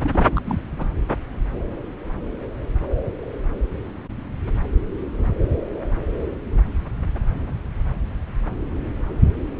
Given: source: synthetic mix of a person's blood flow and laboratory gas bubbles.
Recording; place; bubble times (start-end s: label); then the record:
Doppler ultrasound of blood flow; subclavian vein
0.03-0.59 s: bubbles
0.78-0.90 s: bubbles
From the record:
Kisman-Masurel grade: 211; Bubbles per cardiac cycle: several, 3 to 8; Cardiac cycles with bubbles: 1 to 10%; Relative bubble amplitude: barely perceptible (0.100 to 0.250); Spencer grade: 1 (occasional bubble signal discernible with the cardiac motion signal, with majority of cardiac periods free of bubbles); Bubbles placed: anywhere in the cardiac cycle